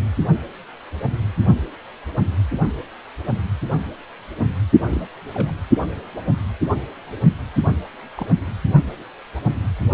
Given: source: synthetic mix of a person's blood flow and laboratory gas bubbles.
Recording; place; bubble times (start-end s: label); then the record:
Doppler ultrasound of blood flow; precordium
4.91-5.07 s: bubbles
5.33-5.52 s: bubbles
8.16-8.27 s: bubbles
From the record:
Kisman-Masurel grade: 121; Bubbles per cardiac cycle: 1 to 2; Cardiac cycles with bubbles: 10 to 50%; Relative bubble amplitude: barely perceptible (0.100 to 0.250); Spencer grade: 2 (many but less than half of the cardiac periods contain bubble signals, singularly or in groups); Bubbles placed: only in the low amplitude regions of the cardiac cycle